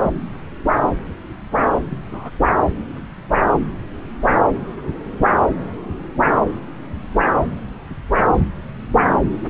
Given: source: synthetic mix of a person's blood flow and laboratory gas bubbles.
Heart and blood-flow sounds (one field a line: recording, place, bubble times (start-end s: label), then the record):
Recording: Doppler ultrasound of blood flow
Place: subclavian vein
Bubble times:
1.89-1.98 s: bubbles
2.10-2.30 s: bubbles
From the record:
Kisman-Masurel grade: 121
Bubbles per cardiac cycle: 1 to 2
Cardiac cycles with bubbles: 10 to 50%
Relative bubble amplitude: barely perceptible (0.100 to 0.250)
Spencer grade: 2 (many but less than half of the cardiac periods contain bubble signals, singularly or in groups)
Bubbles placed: anywhere in the cardiac cycle